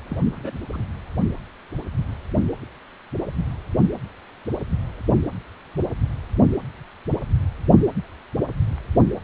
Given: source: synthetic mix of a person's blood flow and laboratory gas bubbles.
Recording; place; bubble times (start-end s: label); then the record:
Doppler ultrasound of blood flow; precordium
0.10-0.16 s: bubbles
0.32-0.58 s: bubbles
0.72-0.84 s: bubbles
From the record:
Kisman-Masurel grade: 211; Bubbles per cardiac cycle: several, 3 to 8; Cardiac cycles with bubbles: 1 to 10%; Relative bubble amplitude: barely perceptible (0.100 to 0.250); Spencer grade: 1 (occasional bubble signal discernible with the cardiac motion signal, with majority of cardiac periods free of bubbles); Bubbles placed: anywhere in the cardiac cycle